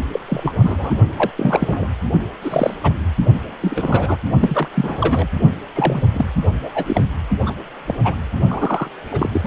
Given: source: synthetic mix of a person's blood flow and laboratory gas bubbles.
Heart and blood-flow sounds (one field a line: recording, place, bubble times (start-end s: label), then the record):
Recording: Doppler ultrasound of blood flow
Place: precordium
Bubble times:
0.12-0.20 s: bubbles
0.28-0.54 s: bubbles
0.58-0.95 s: bubbles
1.17-1.30 s: bubbles
1.36-1.95 s: bubbles
2.42-2.74 s: bubbles
2.83-2.93 s: bubbles
3.62-4.17 s: bubbles
4.39-4.68 s: bubbles
4.74-5.26 s: bubbles
5.74-6.04 s: bubbles
6.12-6.25 s: bubbles
6.63-6.70 s: bubbles
6.75-7.06 s: bubbles
7.46-7.54 s: bubbles
7.87-7.95 s: bubbles
8.03-8.16 s: bubbles
8.48-8.91 s: bubbles
9.07-9.46 s: bubbles
From the record:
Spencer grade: 3 (all of the cardiac periods contain showers or single bubble signals, but not dominating or overriding the cardiac motion signals)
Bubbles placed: only in the low amplitude regions of the cardiac cycle